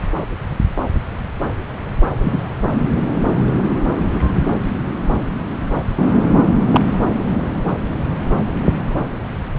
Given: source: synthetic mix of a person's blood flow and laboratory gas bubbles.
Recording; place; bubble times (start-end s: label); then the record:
Doppler ultrasound of blood flow; subclavian vein
2.21-2.40 s: bubbles
6.73-6.81 s: bubbles
From the record:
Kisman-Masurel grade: 112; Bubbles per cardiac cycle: 1 to 2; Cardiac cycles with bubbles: 1 to 10%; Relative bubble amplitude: moderate (0.250 to 0.450); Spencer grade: 1 (occasional bubble signal discernible with the cardiac motion signal, with majority of cardiac periods free of bubbles); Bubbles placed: anywhere in the cardiac cycle